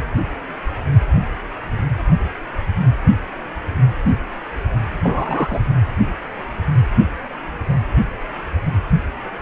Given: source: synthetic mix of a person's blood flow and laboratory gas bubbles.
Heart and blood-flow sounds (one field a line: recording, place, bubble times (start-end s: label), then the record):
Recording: Doppler ultrasound of blood flow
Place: precordium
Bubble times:
5.03-5.60 s: bubbles
From the record:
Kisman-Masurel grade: 123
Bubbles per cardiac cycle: 1 to 2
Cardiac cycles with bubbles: 10 to 50%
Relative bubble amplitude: loud (0.450 to 0.775)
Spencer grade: 2 (many but less than half of the cardiac periods contain bubble signals, singularly or in groups)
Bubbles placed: anywhere in the cardiac cycle